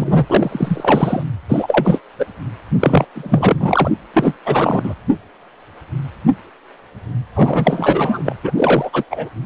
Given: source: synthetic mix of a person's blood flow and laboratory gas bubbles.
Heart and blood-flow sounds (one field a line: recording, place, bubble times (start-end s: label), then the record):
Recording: Doppler ultrasound of blood flow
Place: precordium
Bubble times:
0.00-1.23 s: bubbles
1.48-2.00 s: bubbles
2.19-2.27 s: bubbles
2.80-3.06 s: bubbles
3.15-3.91 s: bubbles
4.13-4.37 s: bubbles
4.46-4.95 s: bubbles
7.36-8.36 s: bubbles
8.43-8.52 s: bubbles
8.57-9.04 s: bubbles
9.10-9.29 s: bubbles
From the record:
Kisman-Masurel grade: 333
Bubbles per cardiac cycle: rolling drumbeat, 9 or more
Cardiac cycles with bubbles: 50 to 99%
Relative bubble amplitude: loud (0.450 to 0.775)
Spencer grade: 3 (all of the cardiac periods contain showers or single bubble signals, but not dominating or overriding the cardiac motion signals)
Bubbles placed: anywhere in the cardiac cycle